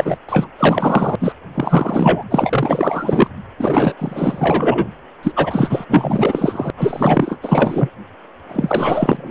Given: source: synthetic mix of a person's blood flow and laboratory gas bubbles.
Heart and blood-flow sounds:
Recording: Doppler ultrasound of blood flow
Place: precordium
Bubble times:
0.00-0.18 s: bubbles
0.28-0.47 s: bubbles
0.58-1.16 s: bubbles
1.20-1.32 s: bubbles
1.54-2.23 s: bubbles
2.29-3.30 s: bubbles
3.58-3.94 s: bubbles
3.98-4.88 s: bubbles
5.23-5.32 s: bubbles
5.36-5.85 s: bubbles
5.89-6.71 s: bubbles
6.77-7.38 s: bubbles
7.42-7.90 s: bubbles
8.48-9.31 s: bubbles
From the record:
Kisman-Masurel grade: 444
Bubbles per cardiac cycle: continuous sound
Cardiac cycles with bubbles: 100%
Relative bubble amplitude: maximal (0.775 to 0.999)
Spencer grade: 4 (maximum detectable bubble signal sounding continuously throughout systole and diastole of every cardiac period, and overriding the amplitude of the normal cardiac signals)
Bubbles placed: anywhere in the cardiac cycle

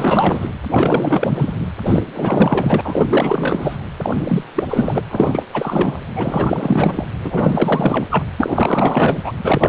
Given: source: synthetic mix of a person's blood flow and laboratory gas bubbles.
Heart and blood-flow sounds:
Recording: Doppler ultrasound of blood flow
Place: precordium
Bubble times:
0.00-0.48 s: bubbles
0.71-1.52 s: bubbles
1.85-2.02 s: bubbles
2.13-2.81 s: bubbles
2.84-3.06 s: bubbles
3.10-3.77 s: bubbles
4.02-4.44 s: bubbles
4.55-4.64 s: bubbles
4.70-5.03 s: bubbles
5.11-5.43 s: bubbles
5.54-6.01 s: bubbles
6.16-7.05 s: bubbles
7.24-8.06 s: bubbles
8.10-8.23 s: bubbles
8.37-9.33 s: bubbles
9.45-9.69 s: bubbles
From the record:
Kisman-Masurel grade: 444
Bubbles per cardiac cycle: continuous sound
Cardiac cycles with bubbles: 100%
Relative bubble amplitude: maximal (0.775 to 0.999)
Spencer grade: 4 (maximum detectable bubble signal sounding continuously throughout systole and diastole of every cardiac period, and overriding the amplitude of the normal cardiac signals)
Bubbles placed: anywhere in the cardiac cycle

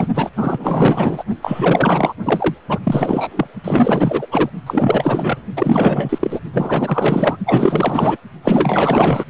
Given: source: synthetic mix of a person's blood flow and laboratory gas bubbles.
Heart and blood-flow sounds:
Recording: Doppler ultrasound of blood flow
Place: precordium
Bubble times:
0.00-0.07 s: bubbles
0.14-0.30 s: bubbles
0.36-1.23 s: bubbles
1.42-2.14 s: bubbles
2.25-2.55 s: bubbles
2.69-2.79 s: bubbles
2.83-3.47 s: bubbles
3.64-4.27 s: bubbles
4.31-4.50 s: bubbles
4.66-5.38 s: bubbles
5.56-6.39 s: bubbles
6.52-7.37 s: bubbles
7.46-8.17 s: bubbles
8.43-9.24 s: bubbles
From the record:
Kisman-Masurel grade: 444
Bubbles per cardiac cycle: continuous sound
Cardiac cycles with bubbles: 100%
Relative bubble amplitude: maximal (0.775 to 0.999)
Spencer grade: 4 (maximum detectable bubble signal sounding continuously throughout systole and diastole of every cardiac period, and overriding the amplitude of the normal cardiac signals)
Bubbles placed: only in the low amplitude regions of the cardiac cycle

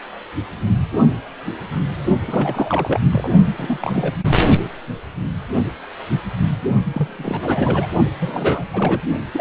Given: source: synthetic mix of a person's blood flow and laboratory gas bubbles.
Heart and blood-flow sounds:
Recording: Doppler ultrasound of blood flow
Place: precordium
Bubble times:
2.27-3.00 s: bubbles
3.10-3.31 s: bubbles
3.56-4.13 s: bubbles
4.21-4.37 s: bubbles
6.92-7.87 s: bubbles
8.19-8.65 s: bubbles
8.73-9.02 s: bubbles
9.32-9.41 s: bubbles
From the record:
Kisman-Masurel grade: 332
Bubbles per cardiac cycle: rolling drumbeat, 9 or more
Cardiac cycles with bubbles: 50 to 99%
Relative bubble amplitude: moderate (0.250 to 0.450)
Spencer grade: 3 (all of the cardiac periods contain showers or single bubble signals, but not dominating or overriding the cardiac motion signals)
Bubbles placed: only in the low amplitude regions of the cardiac cycle

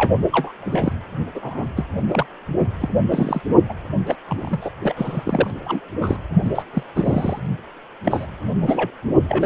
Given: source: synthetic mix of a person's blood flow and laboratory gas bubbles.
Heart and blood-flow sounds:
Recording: Doppler ultrasound of blood flow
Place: precordium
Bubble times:
0.00-0.19 s: bubbles
0.32-0.52 s: bubbles
0.60-0.93 s: bubbles
1.34-1.67 s: bubbles
1.76-1.87 s: bubbles
2.08-2.26 s: bubbles
2.80-2.89 s: bubbles
3.10-3.42 s: bubbles
3.69-3.74 s: bubbles
4.06-4.15 s: bubbles
4.28-4.70 s: bubbles
4.83-5.51 s: bubbles
5.64-5.80 s: bubbles
6.01-6.17 s: bubbles
6.45-6.62 s: bubbles
6.73-6.83 s: bubbles
6.95-7.39 s: bubbles
8.04-8.26 s: bubbles
8.62-8.90 s: bubbles
9.28-9.46 s: bubbles
From the record:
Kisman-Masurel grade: 242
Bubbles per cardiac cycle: several, 3 to 8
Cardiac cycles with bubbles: 100%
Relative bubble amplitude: moderate (0.250 to 0.450)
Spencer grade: 3 (all of the cardiac periods contain showers or single bubble signals, but not dominating or overriding the cardiac motion signals)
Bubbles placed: only in the low amplitude regions of the cardiac cycle

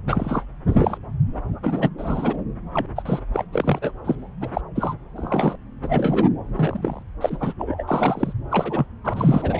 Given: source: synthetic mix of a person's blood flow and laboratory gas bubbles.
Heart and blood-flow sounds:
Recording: Doppler ultrasound of blood flow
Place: subclavian vein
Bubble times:
0.07-0.44 s: bubbles
0.69-0.98 s: bubbles
1.62-1.90 s: bubbles
1.98-2.37 s: bubbles
2.74-2.86 s: bubbles
2.96-3.03 s: bubbles
3.05-3.20 s: bubbles
3.33-3.44 s: bubbles
3.53-3.92 s: bubbles
4.04-4.16 s: bubbles
4.41-4.48 s: bubbles
4.53-4.61 s: bubbles
4.75-4.94 s: bubbles
5.17-5.55 s: bubbles
5.83-6.28 s: bubbles
6.54-7.03 s: bubbles
7.21-7.53 s: bubbles
7.58-7.84 s: bubbles
7.88-8.33 s: bubbles
8.51-8.86 s: bubbles
9.04-9.60 s: bubbles
From the record:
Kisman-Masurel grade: 242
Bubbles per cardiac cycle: several, 3 to 8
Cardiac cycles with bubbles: 100%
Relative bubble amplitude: moderate (0.250 to 0.450)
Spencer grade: 3 (all of the cardiac periods contain showers or single bubble signals, but not dominating or overriding the cardiac motion signals)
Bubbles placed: anywhere in the cardiac cycle

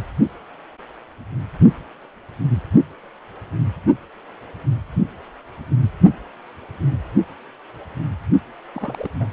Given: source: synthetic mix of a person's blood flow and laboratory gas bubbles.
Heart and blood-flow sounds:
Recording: Doppler ultrasound of blood flow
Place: precordium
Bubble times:
8.75-9.11 s: bubbles
9.19-9.28 s: bubbles
From the record:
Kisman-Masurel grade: 211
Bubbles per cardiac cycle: several, 3 to 8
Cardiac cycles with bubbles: 1 to 10%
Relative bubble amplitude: barely perceptible (0.100 to 0.250)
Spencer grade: 1 (occasional bubble signal discernible with the cardiac motion signal, with majority of cardiac periods free of bubbles)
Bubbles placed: only in the low amplitude regions of the cardiac cycle

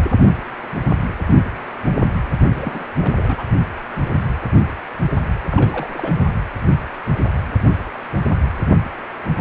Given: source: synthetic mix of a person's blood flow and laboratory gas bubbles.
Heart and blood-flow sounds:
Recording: Doppler ultrasound of blood flow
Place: precordium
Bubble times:
2.41-2.87 s: bubbles
2.97-3.43 s: bubbles
5.51-6.12 s: bubbles
From the record:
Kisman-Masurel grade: 221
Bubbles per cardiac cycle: several, 3 to 8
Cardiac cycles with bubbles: 10 to 50%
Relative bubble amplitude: barely perceptible (0.100 to 0.250)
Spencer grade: 2 (many but less than half of the cardiac periods contain bubble signals, singularly or in groups)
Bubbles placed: anywhere in the cardiac cycle

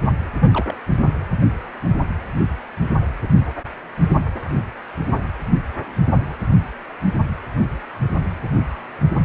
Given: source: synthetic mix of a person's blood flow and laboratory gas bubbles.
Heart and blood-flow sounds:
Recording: Doppler ultrasound of blood flow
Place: precordium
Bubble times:
0.40-0.75 s: bubbles
From the record:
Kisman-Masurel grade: 121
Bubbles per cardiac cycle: 1 to 2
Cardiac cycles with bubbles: 10 to 50%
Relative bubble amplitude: barely perceptible (0.100 to 0.250)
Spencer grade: 2 (many but less than half of the cardiac periods contain bubble signals, singularly or in groups)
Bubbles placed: anywhere in the cardiac cycle

